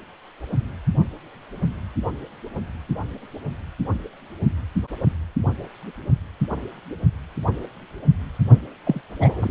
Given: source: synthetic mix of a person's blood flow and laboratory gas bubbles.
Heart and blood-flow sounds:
Doppler ultrasound of blood flow; precordium
8.84-9.00 s: bubbles
9.20-9.51 s: bubbles
From the record:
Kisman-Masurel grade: 212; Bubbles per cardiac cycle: several, 3 to 8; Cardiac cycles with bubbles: 1 to 10%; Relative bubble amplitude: moderate (0.250 to 0.450); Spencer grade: 1 (occasional bubble signal discernible with the cardiac motion signal, with majority of cardiac periods free of bubbles); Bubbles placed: only in the low amplitude regions of the cardiac cycle

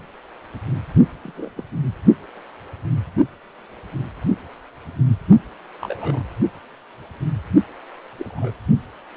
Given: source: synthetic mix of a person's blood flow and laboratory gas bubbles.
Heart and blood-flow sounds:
Doppler ultrasound of blood flow; precordium
1.24-1.32 s: bubbles
1.35-1.50 s: bubbles
1.56-1.63 s: bubbles
5.81-6.22 s: bubbles
8.19-8.50 s: bubbles
From the record:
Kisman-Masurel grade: 121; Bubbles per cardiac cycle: 1 to 2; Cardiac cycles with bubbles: 10 to 50%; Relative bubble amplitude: barely perceptible (0.100 to 0.250); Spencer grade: 2 (many but less than half of the cardiac periods contain bubble signals, singularly or in groups); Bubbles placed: only in the low amplitude regions of the cardiac cycle

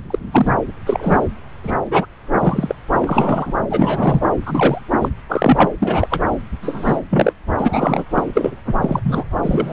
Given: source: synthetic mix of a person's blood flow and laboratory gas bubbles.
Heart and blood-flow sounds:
Doppler ultrasound of blood flow; subclavian vein
0.10-0.19 s: bubbles
0.32-0.52 s: bubbles
0.86-1.19 s: bubbles
1.63-1.75 s: bubbles
1.86-2.06 s: bubbles
2.39-2.75 s: bubbles
3.00-3.54 s: bubbles
3.70-4.21 s: bubbles
4.46-4.82 s: bubbles
5.01-5.08 s: bubbles
5.29-5.71 s: bubbles
5.79-6.08 s: bubbles
6.10-6.20 s: bubbles
6.62-7.00 s: bubbles
7.10-7.33 s: bubbles
7.59-8.04 s: bubbles
8.13-8.26 s: bubbles
8.34-8.51 s: bubbles
8.82-9.24 s: bubbles
9.42-9.73 s: bubbles
From the record:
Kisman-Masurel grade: 243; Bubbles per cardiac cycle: several, 3 to 8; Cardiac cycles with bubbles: 100%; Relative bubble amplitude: loud (0.450 to 0.775); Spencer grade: 3 (all of the cardiac periods contain showers or single bubble signals, but not dominating or overriding the cardiac motion signals); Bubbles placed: anywhere in the cardiac cycle

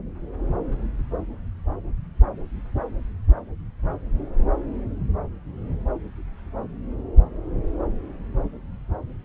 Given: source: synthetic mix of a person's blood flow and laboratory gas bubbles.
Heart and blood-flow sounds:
Doppler ultrasound of blood flow; subclavian vein
no bubbles
From the record:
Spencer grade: 0 (complete lack of bubble signals)

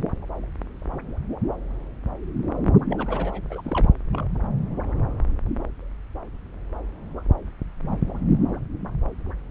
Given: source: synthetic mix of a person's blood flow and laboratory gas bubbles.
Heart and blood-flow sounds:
Doppler ultrasound of blood flow; subclavian vein
2.90-3.41 s: bubbles
3.50-3.61 s: bubbles
3.64-3.89 s: bubbles
4.12-4.25 s: bubbles
From the record:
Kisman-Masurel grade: 211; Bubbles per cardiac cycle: several, 3 to 8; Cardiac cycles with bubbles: 1 to 10%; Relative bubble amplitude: barely perceptible (0.100 to 0.250); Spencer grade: 1 (occasional bubble signal discernible with the cardiac motion signal, with majority of cardiac periods free of bubbles); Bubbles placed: anywhere in the cardiac cycle

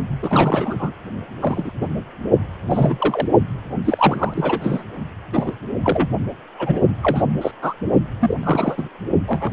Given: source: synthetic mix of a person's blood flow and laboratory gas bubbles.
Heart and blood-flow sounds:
Doppler ultrasound of blood flow; precordium
0.22-0.92 s: bubbles
1.42-1.71 s: bubbles
1.81-1.89 s: bubbles
2.69-3.27 s: bubbles
3.84-4.83 s: bubbles
5.33-5.56 s: bubbles
5.83-6.08 s: bubbles
6.58-6.80 s: bubbles
7.00-7.26 s: bubbles
7.41-7.52 s: bubbles
7.62-7.74 s: bubbles
8.20-8.35 s: bubbles
8.43-8.83 s: bubbles
9.27-9.52 s: bubbles
From the record:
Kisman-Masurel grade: 242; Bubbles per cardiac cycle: several, 3 to 8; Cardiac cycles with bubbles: 100%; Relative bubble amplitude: moderate (0.250 to 0.450); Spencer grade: 3 (all of the cardiac periods contain showers or single bubble signals, but not dominating or overriding the cardiac motion signals); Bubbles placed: only in the low amplitude regions of the cardiac cycle

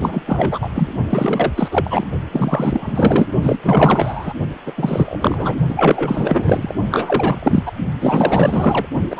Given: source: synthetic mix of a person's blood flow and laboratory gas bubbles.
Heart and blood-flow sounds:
Doppler ultrasound of blood flow; precordium
0.00-0.21 s: bubbles
0.26-0.58 s: bubbles
0.61-0.70 s: bubbles
0.75-0.94 s: bubbles
1.09-1.52 s: bubbles
1.56-1.68 s: bubbles
1.71-2.07 s: bubbles
2.31-3.29 s: bubbles
3.42-3.58 s: bubbles
3.64-4.33 s: bubbles
4.66-4.72 s: bubbles
4.77-5.55 s: bubbles
5.68-6.74 s: bubbles
6.90-7.63 s: bubbles
7.65-7.72 s: bubbles
8.01-8.86 s: bubbles
9.09-9.20 s: bubbles
From the record:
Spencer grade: 4 (maximum detectable bubble signal sounding continuously throughout systole and diastole of every cardiac period, and overriding the amplitude of the normal cardiac signals); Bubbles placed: only in the low amplitude regions of the cardiac cycle

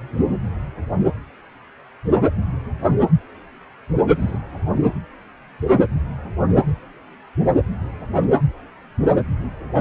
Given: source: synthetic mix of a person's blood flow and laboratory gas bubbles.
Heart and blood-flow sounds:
Doppler ultrasound of blood flow; precordium
4.19-4.38 s: bubbles
From the record:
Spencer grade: 1 (occasional bubble signal discernible with the cardiac motion signal, with majority of cardiac periods free of bubbles); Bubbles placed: anywhere in the cardiac cycle

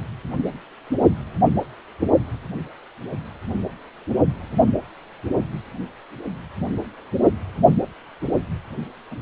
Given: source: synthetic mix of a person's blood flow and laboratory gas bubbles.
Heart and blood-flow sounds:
Doppler ultrasound of blood flow; precordium
9.11-9.15 s: bubbles
From the record:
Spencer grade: 1 (occasional bubble signal discernible with the cardiac motion signal, with majority of cardiac periods free of bubbles); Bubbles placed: only in the low amplitude regions of the cardiac cycle

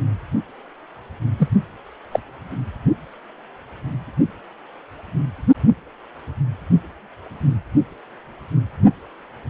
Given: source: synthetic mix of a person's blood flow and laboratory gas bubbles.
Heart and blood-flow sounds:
Doppler ultrasound of blood flow; precordium
1.39-1.48 s: bubbles
2.12-2.19 s: bubbles
From the record:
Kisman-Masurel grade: 113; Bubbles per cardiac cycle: 1 to 2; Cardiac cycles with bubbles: 1 to 10%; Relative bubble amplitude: loud (0.450 to 0.775); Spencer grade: 1 (occasional bubble signal discernible with the cardiac motion signal, with majority of cardiac periods free of bubbles); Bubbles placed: anywhere in the cardiac cycle

